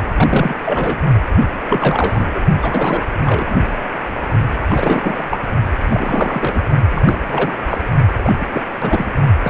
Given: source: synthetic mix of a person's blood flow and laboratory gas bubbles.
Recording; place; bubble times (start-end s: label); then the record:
Doppler ultrasound of blood flow; precordium
0.17-0.54 s: bubbles
0.65-0.98 s: bubbles
1.69-2.28 s: bubbles
2.35-2.41 s: bubbles
2.61-3.04 s: bubbles
3.24-3.58 s: bubbles
4.69-5.23 s: bubbles
5.31-5.38 s: bubbles
5.91-6.61 s: bubbles
6.90-7.18 s: bubbles
7.26-7.51 s: bubbles
7.69-7.77 s: bubbles
8.24-8.33 s: bubbles
8.40-8.46 s: bubbles
8.53-8.61 s: bubbles
8.79-9.06 s: bubbles
9.43-9.50 s: bubbles
From the record:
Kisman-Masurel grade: 342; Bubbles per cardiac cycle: rolling drumbeat, 9 or more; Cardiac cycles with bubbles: 100%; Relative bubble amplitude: moderate (0.250 to 0.450); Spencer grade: 3 (all of the cardiac periods contain showers or single bubble signals, but not dominating or overriding the cardiac motion signals); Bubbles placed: only in the low amplitude regions of the cardiac cycle